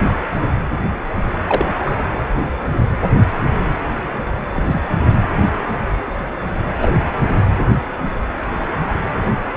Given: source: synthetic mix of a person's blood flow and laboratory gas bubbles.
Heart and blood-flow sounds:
Doppler ultrasound of blood flow; precordium
1.47-1.66 s: bubbles
1.86-1.91 s: bubbles
2.36-2.43 s: bubbles
4.54-4.80 s: bubbles
6.82-6.92 s: bubbles
From the record:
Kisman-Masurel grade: 122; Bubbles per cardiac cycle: 1 to 2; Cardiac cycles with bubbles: 10 to 50%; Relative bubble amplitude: moderate (0.250 to 0.450); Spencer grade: 2 (many but less than half of the cardiac periods contain bubble signals, singularly or in groups); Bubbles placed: anywhere in the cardiac cycle

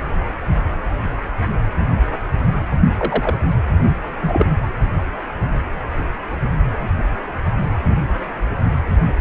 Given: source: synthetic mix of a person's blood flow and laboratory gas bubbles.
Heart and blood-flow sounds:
Doppler ultrasound of blood flow; precordium
2.98-3.35 s: bubbles
4.22-4.46 s: bubbles
From the record:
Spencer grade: 2 (many but less than half of the cardiac periods contain bubble signals, singularly or in groups); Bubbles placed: only in the low amplitude regions of the cardiac cycle

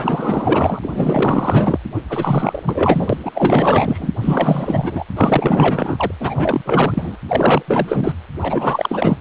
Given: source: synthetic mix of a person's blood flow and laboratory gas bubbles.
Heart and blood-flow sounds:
Doppler ultrasound of blood flow; precordium
0.00-0.79 s: bubbles
0.81-1.79 s: bubbles
1.94-2.02 s: bubbles
2.09-2.63 s: bubbles
2.66-3.17 s: bubbles
3.25-3.31 s: bubbles
3.34-4.09 s: bubbles
4.21-5.05 s: bubbles
5.15-6.12 s: bubbles
6.20-6.62 s: bubbles
6.64-7.16 s: bubbles
7.28-7.62 s: bubbles
7.67-8.14 s: bubbles
8.41-9.17 s: bubbles
From the record:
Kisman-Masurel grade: 444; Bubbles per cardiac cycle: continuous sound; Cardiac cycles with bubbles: 100%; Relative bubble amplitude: maximal (0.775 to 0.999); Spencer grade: 4 (maximum detectable bubble signal sounding continuously throughout systole and diastole of every cardiac period, and overriding the amplitude of the normal cardiac signals); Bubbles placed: anywhere in the cardiac cycle

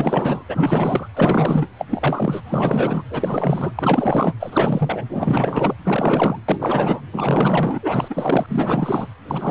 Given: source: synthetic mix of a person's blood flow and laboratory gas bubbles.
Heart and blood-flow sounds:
Doppler ultrasound of blood flow; precordium
0.00-0.43 s: bubbles
0.47-1.09 s: bubbles
1.14-1.67 s: bubbles
1.78-1.85 s: bubbles
1.90-2.41 s: bubbles
2.45-3.03 s: bubbles
3.10-3.73 s: bubbles
3.75-4.34 s: bubbles
4.39-5.04 s: bubbles
5.08-5.75 s: bubbles
5.84-6.40 s: bubbles
6.48-7.01 s: bubbles
7.11-7.79 s: bubbles
7.82-8.46 s: bubbles
8.48-9.07 s: bubbles
9.28-9.50 s: bubbles
From the record:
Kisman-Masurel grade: 444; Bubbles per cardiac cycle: continuous sound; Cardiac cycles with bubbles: 100%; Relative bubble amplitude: maximal (0.775 to 0.999); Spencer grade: 4 (maximum detectable bubble signal sounding continuously throughout systole and diastole of every cardiac period, and overriding the amplitude of the normal cardiac signals); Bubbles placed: anywhere in the cardiac cycle

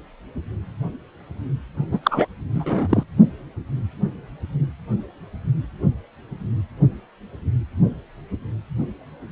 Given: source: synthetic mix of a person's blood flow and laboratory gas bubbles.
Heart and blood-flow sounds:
Doppler ultrasound of blood flow; precordium
1.91-1.99 s: bubbles
2.03-2.26 s: bubbles
2.53-3.03 s: bubbles
From the record:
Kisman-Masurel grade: 223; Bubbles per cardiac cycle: several, 3 to 8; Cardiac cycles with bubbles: 10 to 50%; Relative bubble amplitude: loud (0.450 to 0.775); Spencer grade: 2 (many but less than half of the cardiac periods contain bubble signals, singularly or in groups); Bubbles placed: only in the low amplitude regions of the cardiac cycle

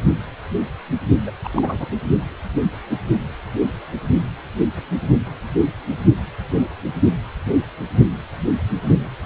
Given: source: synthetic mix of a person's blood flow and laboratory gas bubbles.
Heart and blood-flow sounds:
Doppler ultrasound of blood flow; precordium
1.26-1.31 s: bubbles
1.44-1.49 s: bubbles
1.53-1.86 s: bubbles
From the record:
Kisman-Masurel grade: 212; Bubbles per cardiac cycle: several, 3 to 8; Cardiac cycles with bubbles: 1 to 10%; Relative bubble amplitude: moderate (0.250 to 0.450); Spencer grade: 1 (occasional bubble signal discernible with the cardiac motion signal, with majority of cardiac periods free of bubbles); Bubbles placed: only in the low amplitude regions of the cardiac cycle

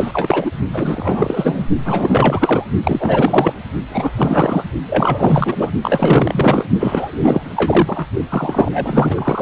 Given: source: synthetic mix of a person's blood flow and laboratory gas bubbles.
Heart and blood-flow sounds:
Doppler ultrasound of blood flow; precordium
0.00-0.51 s: bubbles
0.73-1.67 s: bubbles
1.85-2.65 s: bubbles
2.83-3.54 s: bubbles
3.89-4.12 s: bubbles
4.17-4.63 s: bubbles
4.86-5.71 s: bubbles
5.83-6.65 s: bubbles
6.79-8.06 s: bubbles
8.28-9.42 s: bubbles
From the record:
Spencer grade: 4 (maximum detectable bubble signal sounding continuously throughout systole and diastole of every cardiac period, and overriding the amplitude of the normal cardiac signals); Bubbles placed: only in the low amplitude regions of the cardiac cycle

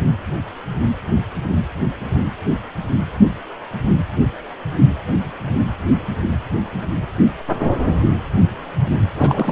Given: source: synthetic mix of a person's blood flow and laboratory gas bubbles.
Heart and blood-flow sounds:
Doppler ultrasound of blood flow; precordium
9.15-9.52 s: bubbles
From the record:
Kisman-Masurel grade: 212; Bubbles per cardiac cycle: several, 3 to 8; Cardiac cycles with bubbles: 1 to 10%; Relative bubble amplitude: moderate (0.250 to 0.450); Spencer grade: 1 (occasional bubble signal discernible with the cardiac motion signal, with majority of cardiac periods free of bubbles); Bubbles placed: anywhere in the cardiac cycle

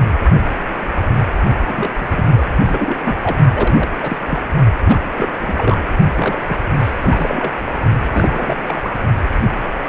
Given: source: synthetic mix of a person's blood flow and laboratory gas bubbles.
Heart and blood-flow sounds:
Doppler ultrasound of blood flow; precordium
1.60-1.90 s: bubbles
1.95-2.46 s: bubbles
2.65-2.97 s: bubbles
3.05-3.18 s: bubbles
3.22-3.39 s: bubbles
3.52-3.90 s: bubbles
4.00-4.17 s: bubbles
4.28-4.39 s: bubbles
4.85-5.00 s: bubbles
5.17-5.29 s: bubbles
5.41-5.77 s: bubbles
6.16-6.62 s: bubbles
6.80-7.52 s: bubbles
8.14-8.57 s: bubbles
8.67-8.96 s: bubbles
From the record:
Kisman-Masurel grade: 332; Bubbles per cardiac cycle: rolling drumbeat, 9 or more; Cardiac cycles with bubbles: 50 to 99%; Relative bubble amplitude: moderate (0.250 to 0.450); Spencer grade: 3 (all of the cardiac periods contain showers or single bubble signals, but not dominating or overriding the cardiac motion signals); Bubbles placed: only in the low amplitude regions of the cardiac cycle

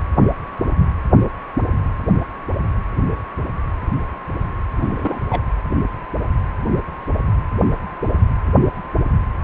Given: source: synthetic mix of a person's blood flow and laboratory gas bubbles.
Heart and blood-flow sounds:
Doppler ultrasound of blood flow; precordium
4.80-5.20 s: bubbles
5.29-5.41 s: bubbles
From the record:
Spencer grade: 1 (occasional bubble signal discernible with the cardiac motion signal, with majority of cardiac periods free of bubbles); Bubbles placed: anywhere in the cardiac cycle

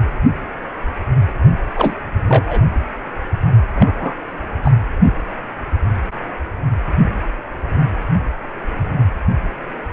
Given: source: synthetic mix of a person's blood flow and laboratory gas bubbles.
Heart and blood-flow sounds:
Doppler ultrasound of blood flow; precordium
1.73-1.94 s: bubbles
2.27-2.44 s: bubbles
2.46-2.65 s: bubbles
3.74-4.13 s: bubbles
4.63-4.72 s: bubbles
From the record:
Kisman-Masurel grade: 222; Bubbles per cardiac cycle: several, 3 to 8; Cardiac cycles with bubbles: 10 to 50%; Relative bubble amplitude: moderate (0.250 to 0.450); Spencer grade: 2 (many but less than half of the cardiac periods contain bubble signals, singularly or in groups); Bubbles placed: anywhere in the cardiac cycle

